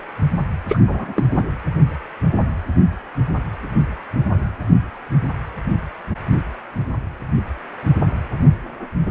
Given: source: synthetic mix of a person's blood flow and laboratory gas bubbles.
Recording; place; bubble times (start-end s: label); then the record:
Doppler ultrasound of blood flow; precordium
0.68-0.78 s: bubbles
0.88-1.24 s: bubbles
1.29-1.46 s: bubbles
From the record:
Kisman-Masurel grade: 212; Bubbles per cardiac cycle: several, 3 to 8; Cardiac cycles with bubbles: 1 to 10%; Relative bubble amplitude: moderate (0.250 to 0.450); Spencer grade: 1 (occasional bubble signal discernible with the cardiac motion signal, with majority of cardiac periods free of bubbles); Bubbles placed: anywhere in the cardiac cycle